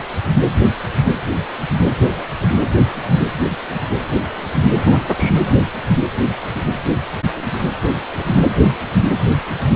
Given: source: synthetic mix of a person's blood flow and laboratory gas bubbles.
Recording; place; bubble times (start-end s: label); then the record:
Doppler ultrasound of blood flow; precordium
4.85-5.40 s: bubbles
From the record:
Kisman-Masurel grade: 211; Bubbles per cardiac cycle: several, 3 to 8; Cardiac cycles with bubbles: 1 to 10%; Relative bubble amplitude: barely perceptible (0.100 to 0.250); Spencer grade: 1 (occasional bubble signal discernible with the cardiac motion signal, with majority of cardiac periods free of bubbles); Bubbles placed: anywhere in the cardiac cycle